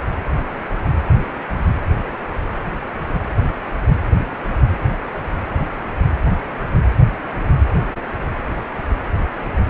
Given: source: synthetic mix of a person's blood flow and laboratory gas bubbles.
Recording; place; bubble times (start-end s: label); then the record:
Doppler ultrasound of blood flow; precordium
no bubbles
From the record:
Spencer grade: 0 (complete lack of bubble signals)